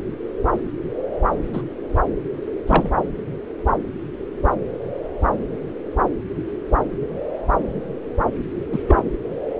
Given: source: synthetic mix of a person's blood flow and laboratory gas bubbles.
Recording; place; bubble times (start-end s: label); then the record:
Doppler ultrasound of blood flow; subclavian vein
1.54-1.62 s: bubbles
2.67-2.91 s: bubbles
8.72-8.79 s: bubbles
8.87-9.04 s: bubbles
From the record:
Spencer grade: 2 (many but less than half of the cardiac periods contain bubble signals, singularly or in groups); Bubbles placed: anywhere in the cardiac cycle